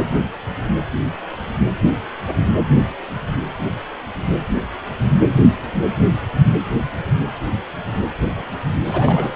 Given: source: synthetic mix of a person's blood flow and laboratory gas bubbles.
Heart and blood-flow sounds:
Doppler ultrasound of blood flow; precordium
8.87-9.36 s: bubbles
From the record:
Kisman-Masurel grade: 222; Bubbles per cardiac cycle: several, 3 to 8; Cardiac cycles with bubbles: 10 to 50%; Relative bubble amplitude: moderate (0.250 to 0.450); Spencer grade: 2 (many but less than half of the cardiac periods contain bubble signals, singularly or in groups); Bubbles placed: anywhere in the cardiac cycle

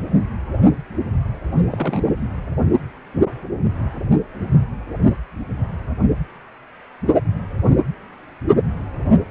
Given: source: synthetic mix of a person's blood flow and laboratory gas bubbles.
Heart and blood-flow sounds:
Doppler ultrasound of blood flow; precordium
1.65-2.16 s: bubbles
From the record:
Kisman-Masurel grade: 211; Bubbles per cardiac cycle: several, 3 to 8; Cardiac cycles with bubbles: 1 to 10%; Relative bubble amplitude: barely perceptible (0.100 to 0.250); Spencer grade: 1 (occasional bubble signal discernible with the cardiac motion signal, with majority of cardiac periods free of bubbles); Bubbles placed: anywhere in the cardiac cycle

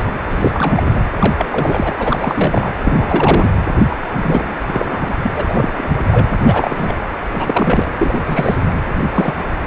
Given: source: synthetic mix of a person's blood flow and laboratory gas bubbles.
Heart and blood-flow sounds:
Doppler ultrasound of blood flow; precordium
0.00-0.13 s: bubbles
0.28-1.01 s: bubbles
1.17-1.35 s: bubbles
1.38-1.46 s: bubbles
1.51-1.93 s: bubbles
1.99-2.73 s: bubbles
2.83-3.52 s: bubbles
3.90-3.96 s: bubbles
4.21-4.56 s: bubbles
4.68-5.18 s: bubbles
5.22-5.30 s: bubbles
5.35-5.46 s: bubbles
5.48-5.71 s: bubbles
5.77-6.02 s: bubbles
6.08-6.27 s: bubbles
6.30-6.38 s: bubbles
6.43-6.95 s: bubbles
7.32-7.89 s: bubbles
7.99-8.21 s: bubbles
8.24-8.56 s: bubbles
8.66-8.74 s: bubbles
9.14-9.34 s: bubbles
From the record:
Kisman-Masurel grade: 342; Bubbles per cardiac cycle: rolling drumbeat, 9 or more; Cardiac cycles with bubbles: 100%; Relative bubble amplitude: moderate (0.250 to 0.450); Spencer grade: 3 (all of the cardiac periods contain showers or single bubble signals, but not dominating or overriding the cardiac motion signals); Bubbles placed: anywhere in the cardiac cycle

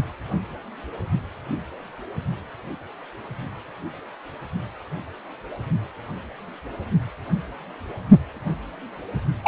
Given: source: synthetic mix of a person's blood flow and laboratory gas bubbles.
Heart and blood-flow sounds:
Doppler ultrasound of blood flow; precordium
9.44-9.48 s: bubbles
From the record:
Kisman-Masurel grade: 213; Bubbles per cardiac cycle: several, 3 to 8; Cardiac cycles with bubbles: 1 to 10%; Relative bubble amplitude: loud (0.450 to 0.775); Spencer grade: 1 (occasional bubble signal discernible with the cardiac motion signal, with majority of cardiac periods free of bubbles); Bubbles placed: only in the low amplitude regions of the cardiac cycle

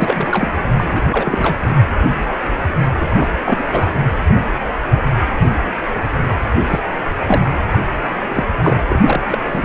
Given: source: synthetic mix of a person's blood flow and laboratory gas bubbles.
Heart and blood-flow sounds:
Doppler ultrasound of blood flow; precordium
0.00-0.53 s: bubbles
0.77-0.84 s: bubbles
0.95-1.02 s: bubbles
1.10-1.58 s: bubbles
1.69-1.74 s: bubbles
3.00-3.06 s: bubbles
3.19-3.29 s: bubbles
3.46-3.64 s: bubbles
3.67-3.87 s: bubbles
6.69-6.79 s: bubbles
7.16-7.52 s: bubbles
7.68-7.79 s: bubbles
8.28-8.43 s: bubbles
8.63-8.81 s: bubbles
8.89-9.02 s: bubbles
9.05-9.20 s: bubbles
9.28-9.38 s: bubbles
9.51-9.65 s: bubbles
From the record:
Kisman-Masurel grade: 232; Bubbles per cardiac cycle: several, 3 to 8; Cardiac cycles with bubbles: 50 to 99%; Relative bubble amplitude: moderate (0.250 to 0.450); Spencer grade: 3 (all of the cardiac periods contain showers or single bubble signals, but not dominating or overriding the cardiac motion signals); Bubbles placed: anywhere in the cardiac cycle

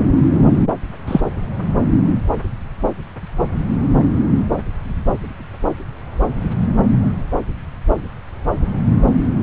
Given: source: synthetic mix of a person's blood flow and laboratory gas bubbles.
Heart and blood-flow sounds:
Doppler ultrasound of blood flow; subclavian vein
1.07-1.21 s: bubbles
From the record:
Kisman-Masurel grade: 113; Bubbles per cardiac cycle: 1 to 2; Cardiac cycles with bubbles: 1 to 10%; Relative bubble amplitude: loud (0.450 to 0.775); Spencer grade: 1 (occasional bubble signal discernible with the cardiac motion signal, with majority of cardiac periods free of bubbles); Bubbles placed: anywhere in the cardiac cycle

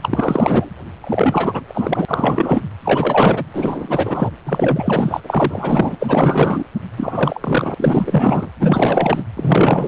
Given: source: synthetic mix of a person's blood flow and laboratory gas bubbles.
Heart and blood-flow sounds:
Doppler ultrasound of blood flow; precordium
0.02-0.70 s: bubbles
1.03-1.64 s: bubbles
1.66-2.62 s: bubbles
2.80-3.44 s: bubbles
3.53-4.30 s: bubbles
4.44-5.21 s: bubbles
5.23-5.96 s: bubbles
6.00-6.63 s: bubbles
6.96-7.75 s: bubbles
7.77-8.51 s: bubbles
8.60-9.24 s: bubbles
9.36-9.88 s: bubbles
From the record:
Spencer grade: 4 (maximum detectable bubble signal sounding continuously throughout systole and diastole of every cardiac period, and overriding the amplitude of the normal cardiac signals); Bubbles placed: anywhere in the cardiac cycle

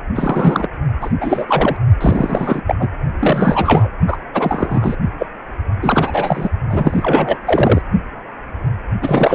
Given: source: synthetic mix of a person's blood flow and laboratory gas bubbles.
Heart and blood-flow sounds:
Doppler ultrasound of blood flow; precordium
0.15-0.67 s: bubbles
1.01-1.10 s: bubbles
1.20-1.77 s: bubbles
2.01-2.62 s: bubbles
2.67-2.75 s: bubbles
2.79-2.89 s: bubbles
3.19-3.88 s: bubbles
4.07-4.17 s: bubbles
4.33-4.96 s: bubbles
5.18-5.26 s: bubbles
5.82-6.49 s: bubbles
6.69-7.38 s: bubbles
7.46-7.82 s: bubbles
9.01-9.34 s: bubbles
From the record:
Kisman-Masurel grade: 333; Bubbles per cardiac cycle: rolling drumbeat, 9 or more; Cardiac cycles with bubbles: 50 to 99%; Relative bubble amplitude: loud (0.450 to 0.775); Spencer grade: 3 (all of the cardiac periods contain showers or single bubble signals, but not dominating or overriding the cardiac motion signals); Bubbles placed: only in the low amplitude regions of the cardiac cycle

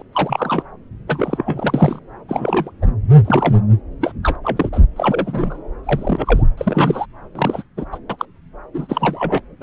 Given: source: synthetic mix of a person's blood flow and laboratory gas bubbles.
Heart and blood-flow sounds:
Doppler ultrasound of blood flow; subclavian vein
0.00-0.02 s: bubbles
0.12-0.63 s: bubbles
1.07-1.99 s: bubbles
2.28-2.71 s: bubbles
2.82-2.87 s: bubbles
3.25-3.58 s: bubbles
4.01-4.12 s: bubbles
4.23-4.36 s: bubbles
4.44-4.69 s: bubbles
4.72-4.79 s: bubbles
4.96-5.61 s: bubbles
5.83-6.46 s: bubbles
6.58-7.06 s: bubbles
7.35-7.63 s: bubbles
7.77-7.85 s: bubbles
7.92-7.98 s: bubbles
8.10-8.16 s: bubbles
8.19-8.26 s: bubbles
8.73-9.39 s: bubbles
9.60-9.63 s: bubbles
From the record:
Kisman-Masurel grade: 242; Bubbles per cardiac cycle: several, 3 to 8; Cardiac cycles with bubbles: 100%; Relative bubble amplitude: moderate (0.250 to 0.450); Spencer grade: 3 (all of the cardiac periods contain showers or single bubble signals, but not dominating or overriding the cardiac motion signals); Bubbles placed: anywhere in the cardiac cycle

